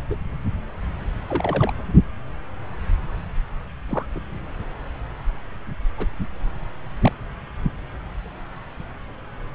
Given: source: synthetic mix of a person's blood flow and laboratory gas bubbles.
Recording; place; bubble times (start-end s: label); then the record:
Doppler ultrasound of blood flow; subclavian vein
0.10-0.17 s: bubbles
1.28-1.72 s: bubbles
3.88-4.06 s: bubbles
4.14-4.20 s: bubbles
5.98-6.07 s: bubbles
7.01-7.12 s: bubbles
7.62-7.72 s: bubbles
From the record:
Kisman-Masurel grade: 121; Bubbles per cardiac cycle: 1 to 2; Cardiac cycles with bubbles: 10 to 50%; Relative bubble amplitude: barely perceptible (0.100 to 0.250); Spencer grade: 2 (many but less than half of the cardiac periods contain bubble signals, singularly or in groups); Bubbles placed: anywhere in the cardiac cycle